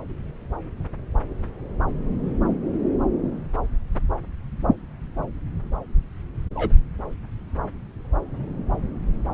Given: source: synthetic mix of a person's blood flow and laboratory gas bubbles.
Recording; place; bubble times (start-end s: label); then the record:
Doppler ultrasound of blood flow; subclavian vein
6.55-6.73 s: bubbles
From the record:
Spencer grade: 1 (occasional bubble signal discernible with the cardiac motion signal, with majority of cardiac periods free of bubbles); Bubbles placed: anywhere in the cardiac cycle